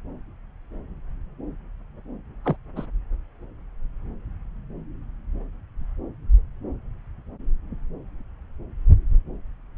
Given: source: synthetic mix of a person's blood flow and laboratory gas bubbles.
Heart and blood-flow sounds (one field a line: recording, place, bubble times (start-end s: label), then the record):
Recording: Doppler ultrasound of blood flow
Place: subclavian vein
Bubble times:
2.44-2.57 s: bubbles
2.76-2.86 s: bubbles
From the record:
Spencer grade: 1 (occasional bubble signal discernible with the cardiac motion signal, with majority of cardiac periods free of bubbles)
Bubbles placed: anywhere in the cardiac cycle